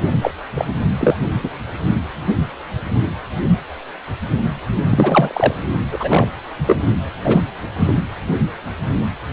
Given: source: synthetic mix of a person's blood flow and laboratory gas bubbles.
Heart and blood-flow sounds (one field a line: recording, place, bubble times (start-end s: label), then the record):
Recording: Doppler ultrasound of blood flow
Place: precordium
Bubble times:
0.12-0.18 s: bubbles
0.22-0.31 s: bubbles
0.54-0.65 s: bubbles
1.00-1.16 s: bubbles
1.44-1.49 s: bubbles
4.91-5.54 s: bubbles
5.92-6.28 s: bubbles
6.66-6.84 s: bubbles
7.24-7.42 s: bubbles
7.78-7.94 s: bubbles
From the record:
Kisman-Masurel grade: 233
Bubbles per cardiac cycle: several, 3 to 8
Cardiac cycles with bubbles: 50 to 99%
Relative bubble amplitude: loud (0.450 to 0.775)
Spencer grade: 3 (all of the cardiac periods contain showers or single bubble signals, but not dominating or overriding the cardiac motion signals)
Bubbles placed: anywhere in the cardiac cycle